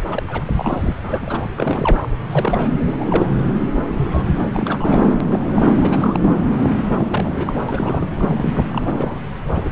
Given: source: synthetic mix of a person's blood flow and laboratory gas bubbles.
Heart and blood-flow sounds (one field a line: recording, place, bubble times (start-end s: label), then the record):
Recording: Doppler ultrasound of blood flow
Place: subclavian vein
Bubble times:
0.11-0.23 s: bubbles
0.28-0.93 s: bubbles
1.03-1.48 s: bubbles
1.56-2.08 s: bubbles
2.32-2.71 s: bubbles
2.79-3.31 s: bubbles
3.75-3.81 s: bubbles
3.96-4.25 s: bubbles
4.53-4.98 s: bubbles
5.03-5.17 s: bubbles
5.20-5.51 s: bubbles
5.54-5.62 s: bubbles
5.81-6.37 s: bubbles
6.86-7.30 s: bubbles
7.36-7.61 s: bubbles
7.69-8.06 s: bubbles
8.15-8.65 s: bubbles
8.71-9.20 s: bubbles
9.52-9.72 s: bubbles
From the record:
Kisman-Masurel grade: 242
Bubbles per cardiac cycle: several, 3 to 8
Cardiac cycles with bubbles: 100%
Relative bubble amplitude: moderate (0.250 to 0.450)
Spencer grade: 3 (all of the cardiac periods contain showers or single bubble signals, but not dominating or overriding the cardiac motion signals)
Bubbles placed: anywhere in the cardiac cycle